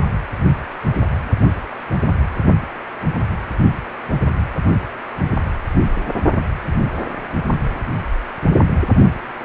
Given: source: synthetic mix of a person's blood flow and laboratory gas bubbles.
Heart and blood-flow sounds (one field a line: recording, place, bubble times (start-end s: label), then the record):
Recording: Doppler ultrasound of blood flow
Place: precordium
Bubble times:
no bubbles
From the record:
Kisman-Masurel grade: 000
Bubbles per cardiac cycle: 0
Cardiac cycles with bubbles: 0%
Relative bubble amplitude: no bubbles discernible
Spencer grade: 0 (complete lack of bubble signals)